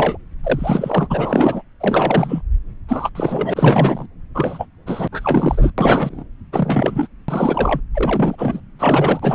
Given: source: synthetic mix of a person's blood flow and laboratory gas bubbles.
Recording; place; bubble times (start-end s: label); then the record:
Doppler ultrasound of blood flow; subclavian vein
0.00-0.17 s: bubbles
0.43-1.62 s: bubbles
1.80-2.42 s: bubbles
2.88-3.10 s: bubbles
3.15-4.07 s: bubbles
4.34-4.67 s: bubbles
4.86-5.08 s: bubbles
5.12-5.71 s: bubbles
5.78-6.24 s: bubbles
6.53-7.08 s: bubbles
7.28-7.81 s: bubbles
7.93-8.61 s: bubbles
8.79-9.35 s: bubbles
From the record:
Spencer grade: 3 (all of the cardiac periods contain showers or single bubble signals, but not dominating or overriding the cardiac motion signals); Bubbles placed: anywhere in the cardiac cycle